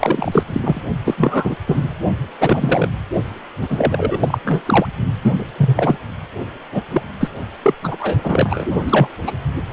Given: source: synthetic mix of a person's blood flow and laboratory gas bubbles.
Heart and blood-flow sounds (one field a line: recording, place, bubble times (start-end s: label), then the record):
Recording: Doppler ultrasound of blood flow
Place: precordium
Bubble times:
0.00-0.44 s: bubbles
0.47-0.81 s: bubbles
1.04-1.15 s: bubbles
1.17-1.55 s: bubbles
1.67-1.88 s: bubbles
2.40-2.89 s: bubbles
3.62-4.38 s: bubbles
4.45-4.62 s: bubbles
4.66-4.87 s: bubbles
5.21-5.46 s: bubbles
5.57-5.96 s: bubbles
6.71-6.81 s: bubbles
6.91-7.02 s: bubbles
7.20-7.29 s: bubbles
7.62-7.74 s: bubbles
7.83-7.97 s: bubbles
8.00-8.18 s: bubbles
8.23-8.65 s: bubbles
8.86-9.07 s: bubbles
9.26-9.32 s: bubbles
From the record:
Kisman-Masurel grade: 243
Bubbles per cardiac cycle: several, 3 to 8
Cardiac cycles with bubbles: 100%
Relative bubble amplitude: loud (0.450 to 0.775)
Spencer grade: 3 (all of the cardiac periods contain showers or single bubble signals, but not dominating or overriding the cardiac motion signals)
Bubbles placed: only in the low amplitude regions of the cardiac cycle